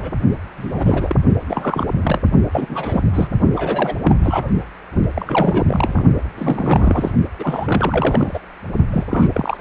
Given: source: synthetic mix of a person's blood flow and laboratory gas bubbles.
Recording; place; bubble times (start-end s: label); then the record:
Doppler ultrasound of blood flow; precordium
0.00-0.10 s: bubbles
0.57-1.16 s: bubbles
1.48-1.87 s: bubbles
2.01-2.21 s: bubbles
2.52-3.01 s: bubbles
3.13-3.27 s: bubbles
3.56-3.96 s: bubbles
4.02-4.50 s: bubbles
5.14-6.04 s: bubbles
6.37-7.11 s: bubbles
7.38-8.40 s: bubbles
8.91-9.06 s: bubbles
9.10-9.28 s: bubbles
9.33-9.61 s: bubbles
From the record:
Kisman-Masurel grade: 332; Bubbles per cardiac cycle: rolling drumbeat, 9 or more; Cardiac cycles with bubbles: 50 to 99%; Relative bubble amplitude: moderate (0.250 to 0.450); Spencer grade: 3 (all of the cardiac periods contain showers or single bubble signals, but not dominating or overriding the cardiac motion signals); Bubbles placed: only in the low amplitude regions of the cardiac cycle